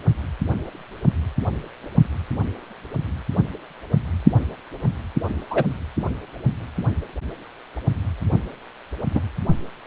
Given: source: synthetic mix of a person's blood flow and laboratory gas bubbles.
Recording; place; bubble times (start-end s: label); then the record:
Doppler ultrasound of blood flow; precordium
5.50-5.64 s: bubbles
9.14-9.21 s: bubbles
From the record:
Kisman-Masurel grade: 123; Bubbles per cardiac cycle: 1 to 2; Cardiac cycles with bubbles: 10 to 50%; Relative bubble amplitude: loud (0.450 to 0.775); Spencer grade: 2 (many but less than half of the cardiac periods contain bubble signals, singularly or in groups); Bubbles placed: only in the low amplitude regions of the cardiac cycle